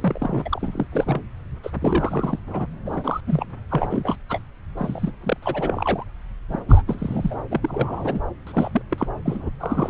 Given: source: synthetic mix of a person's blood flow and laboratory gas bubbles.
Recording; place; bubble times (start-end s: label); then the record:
Doppler ultrasound of blood flow; subclavian vein
0.00-0.87 s: bubbles
0.91-1.21 s: bubbles
1.63-1.71 s: bubbles
1.80-2.40 s: bubbles
2.47-2.67 s: bubbles
2.85-3.21 s: bubbles
3.27-3.46 s: bubbles
3.69-4.16 s: bubbles
4.29-4.40 s: bubbles
4.77-5.12 s: bubbles
5.23-5.37 s: bubbles
5.42-6.04 s: bubbles
6.49-6.62 s: bubbles
6.69-6.82 s: bubbles
6.87-7.38 s: bubbles
7.51-8.21 s: bubbles
8.46-8.82 s: bubbles
8.91-9.07 s: bubbles
9.25-9.50 s: bubbles
9.60-9.90 s: bubbles
From the record:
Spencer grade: 3 (all of the cardiac periods contain showers or single bubble signals, but not dominating or overriding the cardiac motion signals); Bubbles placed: anywhere in the cardiac cycle